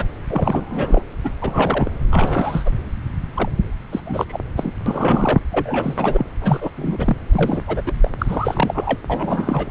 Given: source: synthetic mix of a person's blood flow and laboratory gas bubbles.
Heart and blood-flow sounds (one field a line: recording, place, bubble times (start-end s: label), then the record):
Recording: Doppler ultrasound of blood flow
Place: subclavian vein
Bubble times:
0.00-0.06 s: bubbles
0.28-1.03 s: bubbles
1.24-1.31 s: bubbles
1.41-1.91 s: bubbles
2.11-2.70 s: bubbles
3.35-3.49 s: bubbles
3.91-4.00 s: bubbles
4.06-4.25 s: bubbles
4.28-4.40 s: bubbles
4.56-4.71 s: bubbles
4.86-5.39 s: bubbles
5.52-6.27 s: bubbles
6.41-6.71 s: bubbles
6.77-7.17 s: bubbles
7.33-7.82 s: bubbles
7.86-7.93 s: bubbles
8.00-8.10 s: bubbles
8.18-8.98 s: bubbles
9.09-9.71 s: bubbles
From the record:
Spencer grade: 3 (all of the cardiac periods contain showers or single bubble signals, but not dominating or overriding the cardiac motion signals)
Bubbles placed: anywhere in the cardiac cycle